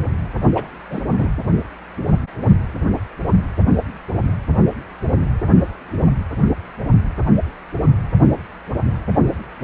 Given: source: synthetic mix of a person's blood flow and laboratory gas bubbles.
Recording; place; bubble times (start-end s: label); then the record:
Doppler ultrasound of blood flow; precordium
0.54-0.67 s: bubbles
0.89-1.03 s: bubbles
1.15-1.30 s: bubbles
From the record:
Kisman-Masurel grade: 211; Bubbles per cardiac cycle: several, 3 to 8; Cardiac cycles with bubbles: 1 to 10%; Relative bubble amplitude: barely perceptible (0.100 to 0.250); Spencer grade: 1 (occasional bubble signal discernible with the cardiac motion signal, with majority of cardiac periods free of bubbles); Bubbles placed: only in the low amplitude regions of the cardiac cycle